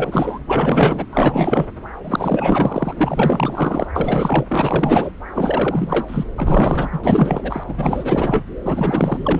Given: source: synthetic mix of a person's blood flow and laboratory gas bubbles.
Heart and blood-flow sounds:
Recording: Doppler ultrasound of blood flow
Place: subclavian vein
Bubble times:
0.00-0.39 s: bubbles
0.46-1.05 s: bubbles
1.12-1.67 s: bubbles
2.04-2.93 s: bubbles
2.96-3.86 s: bubbles
3.95-4.46 s: bubbles
4.48-5.11 s: bubbles
5.35-6.23 s: bubbles
6.37-6.89 s: bubbles
6.92-7.00 s: bubbles
7.03-7.63 s: bubbles
7.68-7.74 s: bubbles
7.77-8.45 s: bubbles
8.64-9.40 s: bubbles
From the record:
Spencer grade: 4 (maximum detectable bubble signal sounding continuously throughout systole and diastole of every cardiac period, and overriding the amplitude of the normal cardiac signals)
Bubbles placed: anywhere in the cardiac cycle

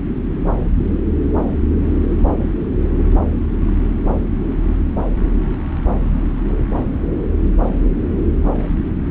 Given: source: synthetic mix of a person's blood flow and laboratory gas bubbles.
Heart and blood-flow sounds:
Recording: Doppler ultrasound of blood flow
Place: subclavian vein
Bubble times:
3.67-3.76 s: bubbles
From the record:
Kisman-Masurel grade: 111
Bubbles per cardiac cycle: 1 to 2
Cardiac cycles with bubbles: 1 to 10%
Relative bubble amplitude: barely perceptible (0.100 to 0.250)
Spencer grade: 1 (occasional bubble signal discernible with the cardiac motion signal, with majority of cardiac periods free of bubbles)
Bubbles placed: anywhere in the cardiac cycle

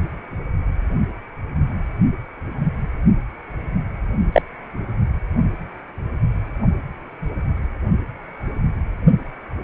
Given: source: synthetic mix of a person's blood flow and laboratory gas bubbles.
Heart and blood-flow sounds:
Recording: Doppler ultrasound of blood flow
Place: precordium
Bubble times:
4.33-4.42 s: bubbles
From the record:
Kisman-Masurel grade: 113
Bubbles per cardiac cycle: 1 to 2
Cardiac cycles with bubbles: 1 to 10%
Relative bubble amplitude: loud (0.450 to 0.775)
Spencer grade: 1 (occasional bubble signal discernible with the cardiac motion signal, with majority of cardiac periods free of bubbles)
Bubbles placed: only in the low amplitude regions of the cardiac cycle

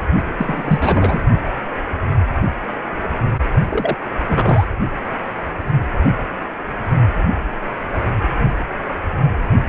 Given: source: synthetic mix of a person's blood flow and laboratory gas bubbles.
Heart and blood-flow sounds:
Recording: Doppler ultrasound of blood flow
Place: precordium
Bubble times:
0.38-1.20 s: bubbles
3.70-3.95 s: bubbles
4.29-4.65 s: bubbles
From the record:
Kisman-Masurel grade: 223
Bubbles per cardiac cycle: several, 3 to 8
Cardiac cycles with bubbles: 10 to 50%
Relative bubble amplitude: loud (0.450 to 0.775)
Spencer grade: 2 (many but less than half of the cardiac periods contain bubble signals, singularly or in groups)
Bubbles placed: only in the low amplitude regions of the cardiac cycle

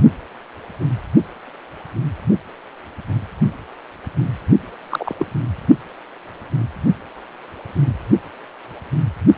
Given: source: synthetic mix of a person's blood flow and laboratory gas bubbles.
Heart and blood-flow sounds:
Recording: Doppler ultrasound of blood flow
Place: precordium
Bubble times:
4.90-5.15 s: bubbles
5.19-5.26 s: bubbles
From the record:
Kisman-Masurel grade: 112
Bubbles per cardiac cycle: 1 to 2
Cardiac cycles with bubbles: 1 to 10%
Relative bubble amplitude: moderate (0.250 to 0.450)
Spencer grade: 1 (occasional bubble signal discernible with the cardiac motion signal, with majority of cardiac periods free of bubbles)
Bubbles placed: only in the low amplitude regions of the cardiac cycle

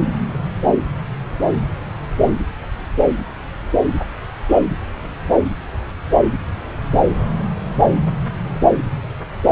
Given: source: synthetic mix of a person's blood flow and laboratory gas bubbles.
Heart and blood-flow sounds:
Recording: Doppler ultrasound of blood flow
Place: subclavian vein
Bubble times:
no bubbles
From the record:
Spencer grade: 0 (complete lack of bubble signals)

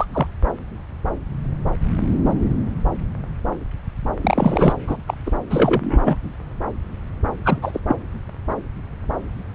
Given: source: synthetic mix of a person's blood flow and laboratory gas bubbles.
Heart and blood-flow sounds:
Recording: Doppler ultrasound of blood flow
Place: subclavian vein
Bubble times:
0.00-0.05 s: bubbles
0.12-0.27 s: bubbles
4.21-4.73 s: bubbles
4.87-4.97 s: bubbles
5.07-5.14 s: bubbles
5.26-5.31 s: bubbles
5.50-6.17 s: bubbles
7.45-7.58 s: bubbles
7.62-7.80 s: bubbles
7.88-7.96 s: bubbles
From the record:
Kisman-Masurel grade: 222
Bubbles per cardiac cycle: several, 3 to 8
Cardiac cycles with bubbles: 10 to 50%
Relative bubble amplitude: moderate (0.250 to 0.450)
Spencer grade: 2 (many but less than half of the cardiac periods contain bubble signals, singularly or in groups)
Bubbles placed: anywhere in the cardiac cycle

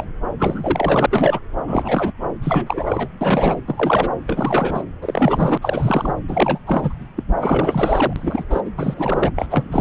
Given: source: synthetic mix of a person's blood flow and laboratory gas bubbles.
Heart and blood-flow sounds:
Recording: Doppler ultrasound of blood flow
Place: subclavian vein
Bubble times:
0.00-0.04 s: bubbles
0.39-1.06 s: bubbles
1.10-1.40 s: bubbles
1.67-2.12 s: bubbles
2.42-3.08 s: bubbles
3.21-3.62 s: bubbles
3.67-4.09 s: bubbles
4.26-4.83 s: bubbles
5.01-5.58 s: bubbles
5.62-6.13 s: bubbles
6.28-6.59 s: bubbles
6.67-6.93 s: bubbles
7.16-7.23 s: bubbles
7.39-8.13 s: bubbles
8.16-8.44 s: bubbles
8.50-8.62 s: bubbles
8.65-8.71 s: bubbles
8.78-8.94 s: bubbles
8.97-9.32 s: bubbles
9.36-9.47 s: bubbles
9.50-9.81 s: bubbles
From the record:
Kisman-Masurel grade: 343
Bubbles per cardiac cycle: rolling drumbeat, 9 or more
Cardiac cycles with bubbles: 100%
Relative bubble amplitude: loud (0.450 to 0.775)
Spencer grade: 3 (all of the cardiac periods contain showers or single bubble signals, but not dominating or overriding the cardiac motion signals)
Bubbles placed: anywhere in the cardiac cycle

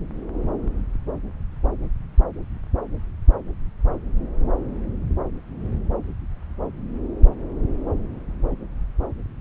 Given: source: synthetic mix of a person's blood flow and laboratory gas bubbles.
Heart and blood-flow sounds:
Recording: Doppler ultrasound of blood flow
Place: subclavian vein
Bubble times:
no bubbles
From the record:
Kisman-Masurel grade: 000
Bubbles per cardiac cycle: 0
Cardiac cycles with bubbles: 0%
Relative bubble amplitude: no bubbles discernible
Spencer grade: 0 (complete lack of bubble signals)

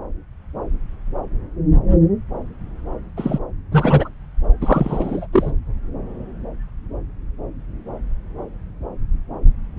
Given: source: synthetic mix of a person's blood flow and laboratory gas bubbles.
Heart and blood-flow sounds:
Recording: Doppler ultrasound of blood flow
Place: subclavian vein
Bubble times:
3.17-3.39 s: bubbles
3.71-4.09 s: bubbles
4.61-5.27 s: bubbles
5.33-5.52 s: bubbles
From the record:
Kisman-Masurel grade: 223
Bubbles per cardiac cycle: several, 3 to 8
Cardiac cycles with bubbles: 10 to 50%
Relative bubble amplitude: loud (0.450 to 0.775)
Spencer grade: 2 (many but less than half of the cardiac periods contain bubble signals, singularly or in groups)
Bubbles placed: anywhere in the cardiac cycle

